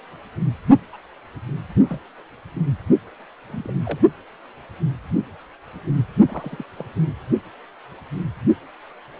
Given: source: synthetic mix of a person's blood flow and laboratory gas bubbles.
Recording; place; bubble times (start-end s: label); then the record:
Doppler ultrasound of blood flow; precordium
0.93-0.97 s: bubbles
1.78-1.99 s: bubbles
3.50-3.70 s: bubbles
3.85-3.99 s: bubbles
6.28-6.63 s: bubbles
6.77-6.86 s: bubbles
From the record:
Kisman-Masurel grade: 221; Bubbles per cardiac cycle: several, 3 to 8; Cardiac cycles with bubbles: 10 to 50%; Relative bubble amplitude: barely perceptible (0.100 to 0.250); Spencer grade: 2 (many but less than half of the cardiac periods contain bubble signals, singularly or in groups); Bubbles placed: only in the low amplitude regions of the cardiac cycle